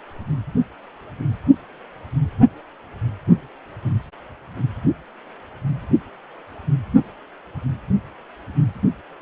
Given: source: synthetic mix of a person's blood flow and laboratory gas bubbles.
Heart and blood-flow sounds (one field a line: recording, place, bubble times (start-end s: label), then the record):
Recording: Doppler ultrasound of blood flow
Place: precordium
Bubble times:
no bubbles
From the record:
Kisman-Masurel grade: 000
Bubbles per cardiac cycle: 0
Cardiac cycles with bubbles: 0%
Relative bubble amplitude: no bubbles discernible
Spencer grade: 0 (complete lack of bubble signals)